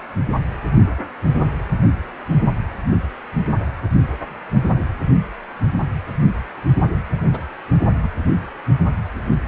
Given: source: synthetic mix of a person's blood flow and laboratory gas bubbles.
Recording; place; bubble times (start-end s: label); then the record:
Doppler ultrasound of blood flow; precordium
7.33-7.40 s: bubbles
8.02-8.09 s: bubbles
From the record:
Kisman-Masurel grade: 112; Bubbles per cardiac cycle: 1 to 2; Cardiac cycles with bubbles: 1 to 10%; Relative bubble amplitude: moderate (0.250 to 0.450); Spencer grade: 1 (occasional bubble signal discernible with the cardiac motion signal, with majority of cardiac periods free of bubbles); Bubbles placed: anywhere in the cardiac cycle